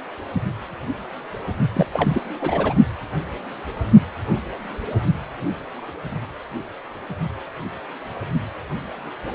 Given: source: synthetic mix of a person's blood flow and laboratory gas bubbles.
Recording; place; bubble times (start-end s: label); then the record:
Doppler ultrasound of blood flow; precordium
1.74-1.86 s: bubbles
1.93-2.28 s: bubbles
2.40-2.74 s: bubbles
From the record:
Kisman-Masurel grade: 212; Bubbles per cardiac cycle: several, 3 to 8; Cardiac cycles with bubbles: 1 to 10%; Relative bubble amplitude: moderate (0.250 to 0.450); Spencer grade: 1 (occasional bubble signal discernible with the cardiac motion signal, with majority of cardiac periods free of bubbles); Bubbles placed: only in the low amplitude regions of the cardiac cycle